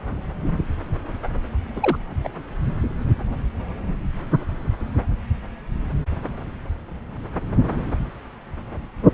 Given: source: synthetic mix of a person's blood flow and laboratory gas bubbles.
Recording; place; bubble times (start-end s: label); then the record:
Doppler ultrasound of blood flow; subclavian vein
1.76-1.97 s: bubbles
2.24-2.29 s: bubbles
From the record:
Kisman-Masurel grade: 212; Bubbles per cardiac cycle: several, 3 to 8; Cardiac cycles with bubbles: 1 to 10%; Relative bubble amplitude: moderate (0.250 to 0.450); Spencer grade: 1 (occasional bubble signal discernible with the cardiac motion signal, with majority of cardiac periods free of bubbles); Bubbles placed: anywhere in the cardiac cycle